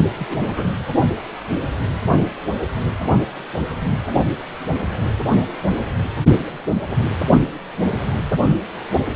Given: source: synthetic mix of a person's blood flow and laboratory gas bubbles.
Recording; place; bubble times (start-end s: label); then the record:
Doppler ultrasound of blood flow; precordium
0.19-0.36 s: bubbles
0.41-0.71 s: bubbles
From the record:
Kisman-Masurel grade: 211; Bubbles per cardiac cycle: several, 3 to 8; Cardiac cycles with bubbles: 1 to 10%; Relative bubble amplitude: barely perceptible (0.100 to 0.250); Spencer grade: 1 (occasional bubble signal discernible with the cardiac motion signal, with majority of cardiac periods free of bubbles); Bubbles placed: only in the low amplitude regions of the cardiac cycle